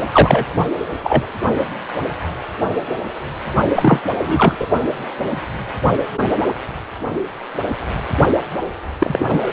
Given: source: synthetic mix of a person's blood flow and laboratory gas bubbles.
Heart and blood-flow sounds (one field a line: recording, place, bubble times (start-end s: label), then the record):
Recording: Doppler ultrasound of blood flow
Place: precordium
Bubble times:
0.12-0.45 s: bubbles
1.03-1.26 s: bubbles
3.75-4.03 s: bubbles
4.18-4.57 s: bubbles
4.60-4.67 s: bubbles
8.99-9.51 s: bubbles
From the record:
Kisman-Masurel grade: 223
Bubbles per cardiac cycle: several, 3 to 8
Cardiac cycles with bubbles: 10 to 50%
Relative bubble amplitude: loud (0.450 to 0.775)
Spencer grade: 2 (many but less than half of the cardiac periods contain bubble signals, singularly or in groups)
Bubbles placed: only in the low amplitude regions of the cardiac cycle